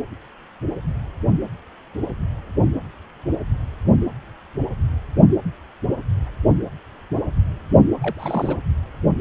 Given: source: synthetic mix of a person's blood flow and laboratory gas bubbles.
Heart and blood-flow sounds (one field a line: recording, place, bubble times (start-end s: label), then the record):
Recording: Doppler ultrasound of blood flow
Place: precordium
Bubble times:
8.02-8.57 s: bubbles
From the record:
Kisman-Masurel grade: 211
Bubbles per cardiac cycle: several, 3 to 8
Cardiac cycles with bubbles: 1 to 10%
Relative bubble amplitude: barely perceptible (0.100 to 0.250)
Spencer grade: 1 (occasional bubble signal discernible with the cardiac motion signal, with majority of cardiac periods free of bubbles)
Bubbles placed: anywhere in the cardiac cycle